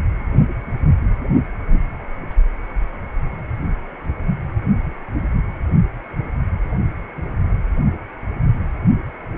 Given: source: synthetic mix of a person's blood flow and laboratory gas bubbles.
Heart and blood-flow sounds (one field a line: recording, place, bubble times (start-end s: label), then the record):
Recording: Doppler ultrasound of blood flow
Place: precordium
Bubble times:
no bubbles
From the record:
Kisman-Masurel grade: 000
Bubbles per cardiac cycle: 0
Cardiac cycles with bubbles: 0%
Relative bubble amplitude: no bubbles discernible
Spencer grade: 0 (complete lack of bubble signals)